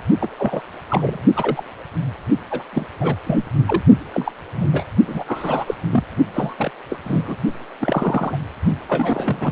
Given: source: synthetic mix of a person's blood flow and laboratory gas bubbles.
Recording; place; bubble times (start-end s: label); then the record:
Doppler ultrasound of blood flow; precordium
0.21-0.28 s: bubbles
0.39-0.61 s: bubbles
0.89-1.20 s: bubbles
1.36-1.64 s: bubbles
2.50-2.65 s: bubbles
2.73-2.86 s: bubbles
3.00-3.16 s: bubbles
3.26-3.36 s: bubbles
3.66-3.81 s: bubbles
4.12-4.33 s: bubbles
4.54-4.84 s: bubbles
5.08-5.24 s: bubbles
5.26-5.65 s: bubbles
5.67-5.75 s: bubbles
5.92-6.04 s: bubbles
6.33-6.54 s: bubbles
6.58-6.71 s: bubbles
6.89-7.00 s: bubbles
7.04-7.36 s: bubbles
7.80-8.37 s: bubbles
8.88-9.52 s: bubbles
From the record:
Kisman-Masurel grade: 242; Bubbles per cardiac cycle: several, 3 to 8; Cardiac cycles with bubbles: 100%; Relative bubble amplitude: moderate (0.250 to 0.450); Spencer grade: 3 (all of the cardiac periods contain showers or single bubble signals, but not dominating or overriding the cardiac motion signals); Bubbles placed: only in the low amplitude regions of the cardiac cycle